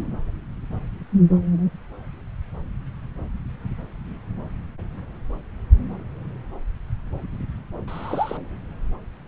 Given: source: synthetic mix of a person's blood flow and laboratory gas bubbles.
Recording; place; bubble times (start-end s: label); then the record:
Doppler ultrasound of blood flow; subclavian vein
7.88-8.38 s: bubbles
From the record:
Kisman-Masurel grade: 111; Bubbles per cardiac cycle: 1 to 2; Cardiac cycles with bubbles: 1 to 10%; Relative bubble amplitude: barely perceptible (0.100 to 0.250); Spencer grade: 1 (occasional bubble signal discernible with the cardiac motion signal, with majority of cardiac periods free of bubbles); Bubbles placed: anywhere in the cardiac cycle